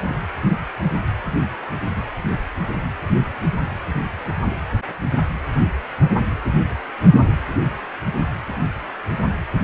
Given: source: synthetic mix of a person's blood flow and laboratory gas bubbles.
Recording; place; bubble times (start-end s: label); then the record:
Doppler ultrasound of blood flow; precordium
0.00-0.15 s: bubbles
From the record:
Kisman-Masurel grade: 211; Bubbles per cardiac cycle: several, 3 to 8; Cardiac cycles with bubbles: 1 to 10%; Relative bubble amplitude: barely perceptible (0.100 to 0.250); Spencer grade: 1 (occasional bubble signal discernible with the cardiac motion signal, with majority of cardiac periods free of bubbles); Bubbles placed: anywhere in the cardiac cycle